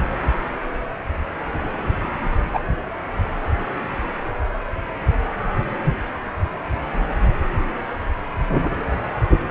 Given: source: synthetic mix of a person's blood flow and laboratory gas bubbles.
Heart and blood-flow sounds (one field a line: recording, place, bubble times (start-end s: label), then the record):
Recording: Doppler ultrasound of blood flow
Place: precordium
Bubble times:
2.52-2.62 s: bubbles
From the record:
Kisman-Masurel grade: 113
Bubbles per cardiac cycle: 1 to 2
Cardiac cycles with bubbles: 1 to 10%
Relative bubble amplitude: loud (0.450 to 0.775)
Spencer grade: 1 (occasional bubble signal discernible with the cardiac motion signal, with majority of cardiac periods free of bubbles)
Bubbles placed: anywhere in the cardiac cycle